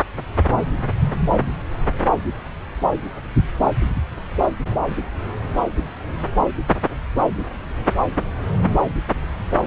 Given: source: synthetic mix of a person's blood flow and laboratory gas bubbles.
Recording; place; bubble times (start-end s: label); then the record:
Doppler ultrasound of blood flow; subclavian vein
no bubbles
From the record:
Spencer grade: 0 (complete lack of bubble signals)